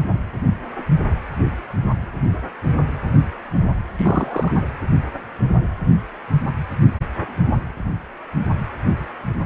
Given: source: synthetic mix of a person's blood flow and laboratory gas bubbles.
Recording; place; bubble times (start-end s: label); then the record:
Doppler ultrasound of blood flow; precordium
3.97-4.64 s: bubbles
From the record:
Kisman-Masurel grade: 212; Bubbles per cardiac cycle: several, 3 to 8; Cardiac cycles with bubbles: 1 to 10%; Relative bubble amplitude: moderate (0.250 to 0.450); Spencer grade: 1 (occasional bubble signal discernible with the cardiac motion signal, with majority of cardiac periods free of bubbles); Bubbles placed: anywhere in the cardiac cycle